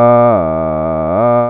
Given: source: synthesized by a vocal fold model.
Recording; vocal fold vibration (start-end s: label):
sustained vowel that changes in the middle
0.00-0.26 s: 119.9 Hz, open quotient 0.39
0.46-1.06 s: 79.4 Hz, open quotient 0.28
1.26-1.50 s: 119.9 Hz, open quotient 0.39